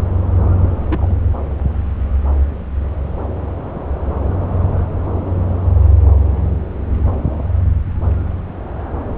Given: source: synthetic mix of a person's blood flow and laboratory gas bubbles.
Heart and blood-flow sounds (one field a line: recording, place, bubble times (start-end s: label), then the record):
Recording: Doppler ultrasound of blood flow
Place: subclavian vein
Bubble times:
0.62-0.69 s: bubbles
0.88-1.19 s: bubbles
3.74-3.81 s: bubbles
From the record:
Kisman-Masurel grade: 121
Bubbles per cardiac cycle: 1 to 2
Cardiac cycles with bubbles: 10 to 50%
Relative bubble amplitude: barely perceptible (0.100 to 0.250)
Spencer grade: 2 (many but less than half of the cardiac periods contain bubble signals, singularly or in groups)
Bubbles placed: anywhere in the cardiac cycle